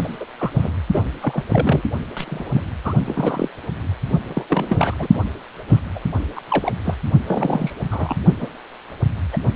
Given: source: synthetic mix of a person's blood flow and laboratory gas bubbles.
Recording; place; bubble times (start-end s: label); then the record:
Doppler ultrasound of blood flow; precordium
0.00-0.16 s: bubbles
0.20-0.25 s: bubbles
0.38-0.50 s: bubbles
0.54-0.71 s: bubbles
0.92-1.02 s: bubbles
1.22-1.43 s: bubbles
1.48-1.82 s: bubbles
2.16-2.63 s: bubbles
2.84-2.94 s: bubbles
3.05-3.49 s: bubbles
4.26-4.46 s: bubbles
4.49-4.94 s: bubbles
4.99-5.08 s: bubbles
5.13-5.22 s: bubbles
5.68-5.79 s: bubbles
5.95-6.00 s: bubbles
6.36-6.41 s: bubbles
6.50-6.73 s: bubbles
6.85-6.95 s: bubbles
7.26-7.73 s: bubbles
7.91-8.17 s: bubbles
8.40-8.49 s: bubbles
9.33-9.37 s: bubbles
9.43-9.50 s: bubbles
From the record:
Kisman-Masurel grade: 242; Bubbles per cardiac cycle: several, 3 to 8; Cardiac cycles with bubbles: 100%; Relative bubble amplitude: moderate (0.250 to 0.450); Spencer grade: 3 (all of the cardiac periods contain showers or single bubble signals, but not dominating or overriding the cardiac motion signals); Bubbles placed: only in the low amplitude regions of the cardiac cycle